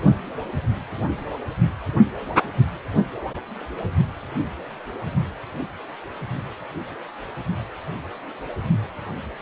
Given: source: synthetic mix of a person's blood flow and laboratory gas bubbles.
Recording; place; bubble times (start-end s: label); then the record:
Doppler ultrasound of blood flow; precordium
3.60-3.64 s: bubbles
From the record:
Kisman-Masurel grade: 111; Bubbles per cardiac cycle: 1 to 2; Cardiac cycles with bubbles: 1 to 10%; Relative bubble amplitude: barely perceptible (0.100 to 0.250); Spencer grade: 1 (occasional bubble signal discernible with the cardiac motion signal, with majority of cardiac periods free of bubbles); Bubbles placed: only in the low amplitude regions of the cardiac cycle